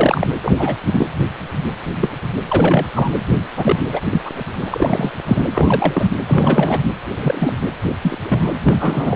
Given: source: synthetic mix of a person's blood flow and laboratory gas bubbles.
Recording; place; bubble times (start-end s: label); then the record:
Doppler ultrasound of blood flow; precordium
0.00-0.27 s: bubbles
0.43-0.53 s: bubbles
0.57-0.75 s: bubbles
0.84-1.07 s: bubbles
2.00-2.12 s: bubbles
2.49-2.85 s: bubbles
2.95-3.10 s: bubbles
3.57-3.76 s: bubbles
3.92-4.01 s: bubbles
4.04-4.21 s: bubbles
4.25-4.31 s: bubbles
4.36-4.43 s: bubbles
4.61-5.12 s: bubbles
5.26-5.44 s: bubbles
5.53-6.08 s: bubbles
6.26-6.81 s: bubbles
7.14-7.55 s: bubbles
8.02-8.18 s: bubbles
8.22-8.53 s: bubbles
8.63-9.16 s: bubbles
From the record:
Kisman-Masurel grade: 243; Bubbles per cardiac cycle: several, 3 to 8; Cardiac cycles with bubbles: 100%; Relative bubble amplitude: loud (0.450 to 0.775); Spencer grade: 3 (all of the cardiac periods contain showers or single bubble signals, but not dominating or overriding the cardiac motion signals); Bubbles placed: anywhere in the cardiac cycle